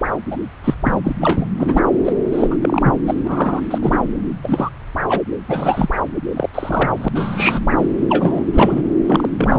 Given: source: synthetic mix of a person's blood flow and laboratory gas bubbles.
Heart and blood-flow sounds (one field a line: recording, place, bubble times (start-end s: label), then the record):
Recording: Doppler ultrasound of blood flow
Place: subclavian vein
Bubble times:
0.30-0.37 s: bubbles
0.64-0.75 s: bubbles
0.83-0.99 s: bubbles
1.04-1.12 s: bubbles
1.21-1.49 s: bubbles
1.58-1.81 s: bubbles
2.04-2.12 s: bubbles
2.31-2.56 s: bubbles
2.61-2.95 s: bubbles
3.06-3.15 s: bubbles
3.24-3.61 s: bubbles
3.71-3.79 s: bubbles
3.81-4.00 s: bubbles
4.43-4.70 s: bubbles
5.08-5.19 s: bubbles
5.48-5.89 s: bubbles
6.36-6.49 s: bubbles
6.54-7.08 s: bubbles
7.14-7.87 s: bubbles
8.09-8.43 s: bubbles
8.53-8.83 s: bubbles
9.08-9.29 s: bubbles
9.38-9.59 s: bubbles
From the record:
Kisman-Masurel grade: 243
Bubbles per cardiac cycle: several, 3 to 8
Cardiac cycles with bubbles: 100%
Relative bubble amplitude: loud (0.450 to 0.775)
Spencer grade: 3 (all of the cardiac periods contain showers or single bubble signals, but not dominating or overriding the cardiac motion signals)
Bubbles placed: anywhere in the cardiac cycle